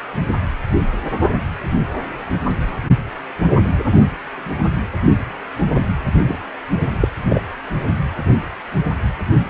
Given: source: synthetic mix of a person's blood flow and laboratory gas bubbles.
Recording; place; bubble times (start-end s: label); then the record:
Doppler ultrasound of blood flow; precordium
6.27-6.38 s: bubbles
7.00-7.08 s: bubbles
7.29-7.42 s: bubbles
From the record:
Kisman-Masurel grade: 123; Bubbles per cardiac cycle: 1 to 2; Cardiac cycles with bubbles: 10 to 50%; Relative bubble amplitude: loud (0.450 to 0.775); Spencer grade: 2 (many but less than half of the cardiac periods contain bubble signals, singularly or in groups); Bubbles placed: anywhere in the cardiac cycle